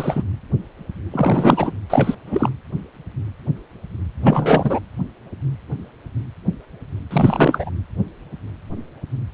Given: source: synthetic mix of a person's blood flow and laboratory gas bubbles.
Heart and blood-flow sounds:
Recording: Doppler ultrasound of blood flow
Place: precordium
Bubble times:
0.00-0.23 s: bubbles
1.12-1.71 s: bubbles
1.90-2.15 s: bubbles
2.26-2.50 s: bubbles
4.23-4.79 s: bubbles
7.11-7.70 s: bubbles
From the record:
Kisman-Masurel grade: 333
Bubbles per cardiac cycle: rolling drumbeat, 9 or more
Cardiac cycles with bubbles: 50 to 99%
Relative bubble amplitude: loud (0.450 to 0.775)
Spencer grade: 3 (all of the cardiac periods contain showers or single bubble signals, but not dominating or overriding the cardiac motion signals)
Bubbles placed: anywhere in the cardiac cycle

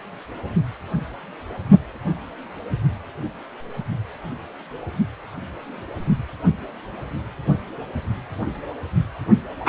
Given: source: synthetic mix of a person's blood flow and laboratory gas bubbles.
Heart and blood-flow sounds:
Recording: Doppler ultrasound of blood flow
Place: precordium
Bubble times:
no bubbles
From the record:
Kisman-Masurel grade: 000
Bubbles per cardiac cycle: 0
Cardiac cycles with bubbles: 0%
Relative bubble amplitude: no bubbles discernible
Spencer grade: 0 (complete lack of bubble signals)

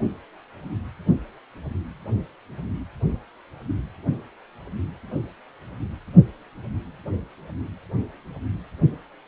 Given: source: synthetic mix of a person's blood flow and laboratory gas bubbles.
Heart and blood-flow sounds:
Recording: Doppler ultrasound of blood flow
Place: precordium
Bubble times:
no bubbles
From the record:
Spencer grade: 0 (complete lack of bubble signals)

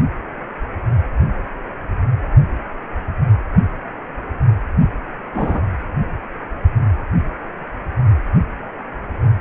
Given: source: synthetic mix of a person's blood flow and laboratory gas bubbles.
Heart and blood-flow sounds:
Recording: Doppler ultrasound of blood flow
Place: precordium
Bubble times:
5.34-5.60 s: bubbles
From the record:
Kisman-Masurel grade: 123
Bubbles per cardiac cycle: 1 to 2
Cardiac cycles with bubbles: 10 to 50%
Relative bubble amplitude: loud (0.450 to 0.775)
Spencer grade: 2 (many but less than half of the cardiac periods contain bubble signals, singularly or in groups)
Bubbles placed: anywhere in the cardiac cycle

